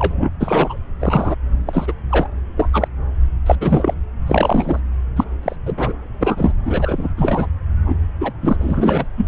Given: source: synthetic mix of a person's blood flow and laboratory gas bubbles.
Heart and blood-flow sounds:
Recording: Doppler ultrasound of blood flow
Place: subclavian vein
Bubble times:
0.00-0.30 s: bubbles
0.40-0.77 s: bubbles
1.01-1.36 s: bubbles
1.66-1.93 s: bubbles
2.09-2.26 s: bubbles
2.56-2.70 s: bubbles
2.72-2.88 s: bubbles
3.46-3.55 s: bubbles
3.60-3.94 s: bubbles
4.26-4.80 s: bubbles
5.17-5.24 s: bubbles
5.42-5.56 s: bubbles
5.66-5.73 s: bubbles
5.77-5.94 s: bubbles
6.20-6.53 s: bubbles
6.65-7.08 s: bubbles
7.17-7.46 s: bubbles
7.85-7.96 s: bubbles
8.20-8.32 s: bubbles
8.41-8.56 s: bubbles
8.60-9.07 s: bubbles
9.17-9.26 s: bubbles
From the record:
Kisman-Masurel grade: 243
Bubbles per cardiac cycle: several, 3 to 8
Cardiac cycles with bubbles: 100%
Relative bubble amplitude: loud (0.450 to 0.775)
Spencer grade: 3 (all of the cardiac periods contain showers or single bubble signals, but not dominating or overriding the cardiac motion signals)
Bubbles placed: anywhere in the cardiac cycle

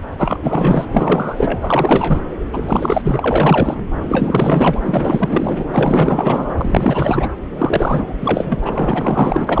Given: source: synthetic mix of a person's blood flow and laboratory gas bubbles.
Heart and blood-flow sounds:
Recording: Doppler ultrasound of blood flow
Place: subclavian vein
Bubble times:
0.18-0.40 s: bubbles
0.42-0.86 s: bubbles
0.91-2.21 s: bubbles
2.46-3.86 s: bubbles
4.08-4.79 s: bubbles
4.83-5.65 s: bubbles
5.71-6.55 s: bubbles
6.57-7.30 s: bubbles
7.57-8.14 s: bubbles
8.20-8.60 s: bubbles
8.63-9.60 s: bubbles
From the record:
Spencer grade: 4 (maximum detectable bubble signal sounding continuously throughout systole and diastole of every cardiac period, and overriding the amplitude of the normal cardiac signals)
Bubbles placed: anywhere in the cardiac cycle

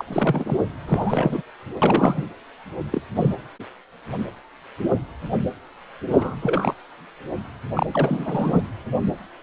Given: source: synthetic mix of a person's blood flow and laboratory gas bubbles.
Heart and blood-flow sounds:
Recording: Doppler ultrasound of blood flow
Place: precordium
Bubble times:
0.00-0.04 s: bubbles
0.07-0.58 s: bubbles
0.87-1.42 s: bubbles
1.81-2.25 s: bubbles
2.92-3.01 s: bubbles
3.15-3.35 s: bubbles
6.10-6.37 s: bubbles
6.42-6.74 s: bubbles
7.74-8.62 s: bubbles
From the record:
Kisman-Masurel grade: 232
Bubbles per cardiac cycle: several, 3 to 8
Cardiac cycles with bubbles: 50 to 99%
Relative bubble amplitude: moderate (0.250 to 0.450)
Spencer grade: 3 (all of the cardiac periods contain showers or single bubble signals, but not dominating or overriding the cardiac motion signals)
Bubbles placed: anywhere in the cardiac cycle

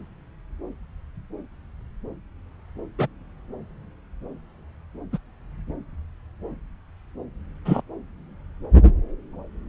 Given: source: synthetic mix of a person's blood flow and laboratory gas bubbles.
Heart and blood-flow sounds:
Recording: Doppler ultrasound of blood flow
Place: subclavian vein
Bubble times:
2.98-3.07 s: bubbles
5.12-5.18 s: bubbles
7.65-7.81 s: bubbles
From the record:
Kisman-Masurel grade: 123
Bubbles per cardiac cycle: 1 to 2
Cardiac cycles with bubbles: 10 to 50%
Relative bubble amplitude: loud (0.450 to 0.775)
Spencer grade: 2 (many but less than half of the cardiac periods contain bubble signals, singularly or in groups)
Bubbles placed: anywhere in the cardiac cycle

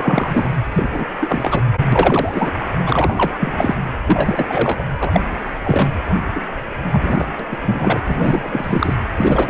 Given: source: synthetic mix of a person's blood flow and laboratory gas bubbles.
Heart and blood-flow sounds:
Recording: Doppler ultrasound of blood flow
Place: precordium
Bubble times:
0.00-0.49 s: bubbles
0.72-0.84 s: bubbles
0.92-1.06 s: bubbles
1.21-1.62 s: bubbles
1.92-2.51 s: bubbles
2.60-2.65 s: bubbles
2.86-3.76 s: bubbles
4.04-4.83 s: bubbles
5.00-5.21 s: bubbles
5.64-6.12 s: bubbles
6.36-6.41 s: bubbles
6.92-7.27 s: bubbles
7.39-7.47 s: bubbles
7.51-7.58 s: bubbles
7.65-8.01 s: bubbles
8.04-8.94 s: bubbles
9.17-9.50 s: bubbles
From the record:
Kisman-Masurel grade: 343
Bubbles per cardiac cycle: rolling drumbeat, 9 or more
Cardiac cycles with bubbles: 100%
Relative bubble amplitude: loud (0.450 to 0.775)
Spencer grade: 3 (all of the cardiac periods contain showers or single bubble signals, but not dominating or overriding the cardiac motion signals)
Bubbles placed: anywhere in the cardiac cycle

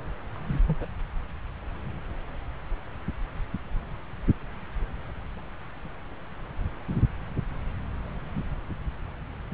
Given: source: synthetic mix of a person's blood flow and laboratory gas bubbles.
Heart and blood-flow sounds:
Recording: Doppler ultrasound of blood flow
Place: subclavian vein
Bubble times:
0.33-0.60 s: bubbles
0.67-0.77 s: bubbles
0.80-0.85 s: bubbles
From the record:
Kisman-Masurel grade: 211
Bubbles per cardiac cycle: several, 3 to 8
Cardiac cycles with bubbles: 1 to 10%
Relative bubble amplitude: barely perceptible (0.100 to 0.250)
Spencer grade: 1 (occasional bubble signal discernible with the cardiac motion signal, with majority of cardiac periods free of bubbles)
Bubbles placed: anywhere in the cardiac cycle

